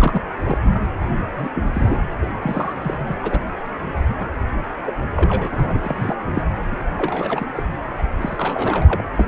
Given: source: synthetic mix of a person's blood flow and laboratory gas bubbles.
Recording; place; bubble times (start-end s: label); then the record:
Doppler ultrasound of blood flow; precordium
0.00-0.20 s: bubbles
0.43-0.58 s: bubbles
0.64-0.69 s: bubbles
0.75-0.78 s: bubbles
1.37-1.49 s: bubbles
1.55-1.68 s: bubbles
1.73-2.01 s: bubbles
2.21-2.26 s: bubbles
2.42-2.74 s: bubbles
2.82-2.99 s: bubbles
3.07-3.14 s: bubbles
3.22-3.39 s: bubbles
4.18-4.26 s: bubbles
4.83-4.93 s: bubbles
5.15-5.47 s: bubbles
5.51-6.16 s: bubbles
6.34-6.43 s: bubbles
6.71-6.88 s: bubbles
6.97-7.46 s: bubbles
7.56-7.63 s: bubbles
7.98-8.04 s: bubbles
8.21-9.03 s: bubbles
9.16-9.25 s: bubbles
From the record:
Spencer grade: 3 (all of the cardiac periods contain showers or single bubble signals, but not dominating or overriding the cardiac motion signals); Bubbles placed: anywhere in the cardiac cycle